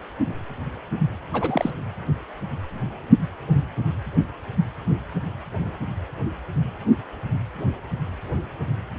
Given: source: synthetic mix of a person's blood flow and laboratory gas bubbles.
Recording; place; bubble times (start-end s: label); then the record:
Doppler ultrasound of blood flow; precordium
1.33-1.70 s: bubbles
From the record:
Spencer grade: 1 (occasional bubble signal discernible with the cardiac motion signal, with majority of cardiac periods free of bubbles); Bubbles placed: anywhere in the cardiac cycle